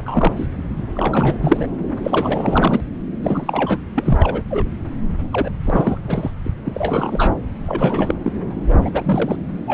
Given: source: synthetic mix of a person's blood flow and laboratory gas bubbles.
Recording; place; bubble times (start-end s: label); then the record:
Doppler ultrasound of blood flow; subclavian vein
0.00-0.33 s: bubbles
0.36-0.48 s: bubbles
0.94-1.68 s: bubbles
2.03-2.81 s: bubbles
3.22-3.77 s: bubbles
3.94-4.42 s: bubbles
4.50-4.69 s: bubbles
5.33-5.51 s: bubbles
5.65-5.97 s: bubbles
6.04-6.30 s: bubbles
6.44-6.52 s: bubbles
6.64-7.33 s: bubbles
7.67-8.15 s: bubbles
8.24-8.33 s: bubbles
8.69-8.78 s: bubbles
8.85-9.36 s: bubbles
9.68-9.74 s: bubbles
From the record:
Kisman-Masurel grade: 342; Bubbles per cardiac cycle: rolling drumbeat, 9 or more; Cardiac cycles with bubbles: 100%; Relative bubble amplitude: moderate (0.250 to 0.450); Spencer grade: 3 (all of the cardiac periods contain showers or single bubble signals, but not dominating or overriding the cardiac motion signals); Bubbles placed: anywhere in the cardiac cycle